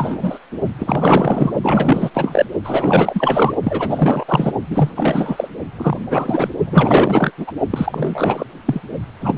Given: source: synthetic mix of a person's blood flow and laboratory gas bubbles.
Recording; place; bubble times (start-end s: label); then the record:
Doppler ultrasound of blood flow; precordium
0.00-0.39 s: bubbles
0.78-1.53 s: bubbles
1.62-2.10 s: bubbles
2.14-2.46 s: bubbles
2.64-3.55 s: bubbles
3.63-4.24 s: bubbles
4.28-4.52 s: bubbles
4.70-4.89 s: bubbles
4.96-5.48 s: bubbles
5.77-5.97 s: bubbles
6.10-6.50 s: bubbles
6.66-7.31 s: bubbles
7.38-7.52 s: bubbles
7.70-8.45 s: bubbles
8.65-8.80 s: bubbles
9.20-9.38 s: bubbles
From the record:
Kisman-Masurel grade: 444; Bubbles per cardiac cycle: continuous sound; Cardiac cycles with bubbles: 100%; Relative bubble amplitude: maximal (0.775 to 0.999); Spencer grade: 4 (maximum detectable bubble signal sounding continuously throughout systole and diastole of every cardiac period, and overriding the amplitude of the normal cardiac signals); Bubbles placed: only in the low amplitude regions of the cardiac cycle